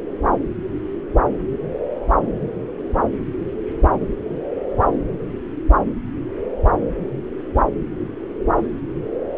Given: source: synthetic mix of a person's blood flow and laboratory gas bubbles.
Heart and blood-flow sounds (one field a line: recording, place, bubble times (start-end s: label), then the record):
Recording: Doppler ultrasound of blood flow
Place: subclavian vein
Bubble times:
no bubbles
From the record:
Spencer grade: 0 (complete lack of bubble signals)